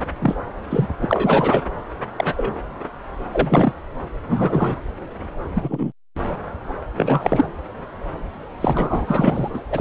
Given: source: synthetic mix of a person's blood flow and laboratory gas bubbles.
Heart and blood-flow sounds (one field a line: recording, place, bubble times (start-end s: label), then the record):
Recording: Doppler ultrasound of blood flow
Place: subclavian vein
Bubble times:
0.21-0.35 s: bubbles
0.70-0.88 s: bubbles
1.01-1.62 s: bubbles
2.17-2.62 s: bubbles
3.33-3.73 s: bubbles
4.29-4.75 s: bubbles
5.54-5.92 s: bubbles
6.98-7.53 s: bubbles
8.60-9.48 s: bubbles
9.53-9.59 s: bubbles
9.70-9.81 s: bubbles
From the record:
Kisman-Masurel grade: 232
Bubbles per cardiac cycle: several, 3 to 8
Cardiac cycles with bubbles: 50 to 99%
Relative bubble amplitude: moderate (0.250 to 0.450)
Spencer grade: 3 (all of the cardiac periods contain showers or single bubble signals, but not dominating or overriding the cardiac motion signals)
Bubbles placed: anywhere in the cardiac cycle